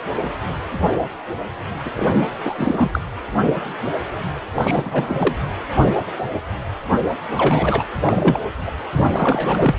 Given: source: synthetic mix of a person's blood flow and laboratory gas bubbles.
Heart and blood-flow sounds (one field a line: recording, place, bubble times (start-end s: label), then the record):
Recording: Doppler ultrasound of blood flow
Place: precordium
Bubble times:
1.85-1.90 s: bubbles
1.96-2.10 s: bubbles
2.44-2.54 s: bubbles
2.58-3.01 s: bubbles
4.54-5.35 s: bubbles
7.37-7.84 s: bubbles
8.01-8.38 s: bubbles
8.66-8.71 s: bubbles
8.91-9.79 s: bubbles
From the record:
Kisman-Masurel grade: 333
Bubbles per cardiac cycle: rolling drumbeat, 9 or more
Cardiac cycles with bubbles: 50 to 99%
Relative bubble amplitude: loud (0.450 to 0.775)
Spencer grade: 3 (all of the cardiac periods contain showers or single bubble signals, but not dominating or overriding the cardiac motion signals)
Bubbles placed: anywhere in the cardiac cycle